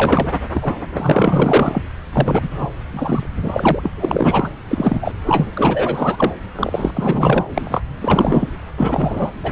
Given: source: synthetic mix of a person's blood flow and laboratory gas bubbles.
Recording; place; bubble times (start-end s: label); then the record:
Doppler ultrasound of blood flow; subclavian vein
0.00-0.33 s: bubbles
0.54-0.76 s: bubbles
0.92-1.82 s: bubbles
2.12-2.48 s: bubbles
2.50-2.68 s: bubbles
2.92-3.27 s: bubbles
3.42-3.91 s: bubbles
3.96-4.51 s: bubbles
4.65-5.12 s: bubbles
5.25-5.51 s: bubbles
5.55-6.34 s: bubbles
6.55-6.91 s: bubbles
6.94-7.50 s: bubbles
7.54-7.83 s: bubbles
8.00-8.49 s: bubbles
8.76-9.30 s: bubbles
9.43-9.52 s: bubbles
From the record:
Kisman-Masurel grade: 444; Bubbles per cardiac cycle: continuous sound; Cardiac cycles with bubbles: 100%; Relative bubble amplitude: maximal (0.775 to 0.999); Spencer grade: 4 (maximum detectable bubble signal sounding continuously throughout systole and diastole of every cardiac period, and overriding the amplitude of the normal cardiac signals); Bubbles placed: anywhere in the cardiac cycle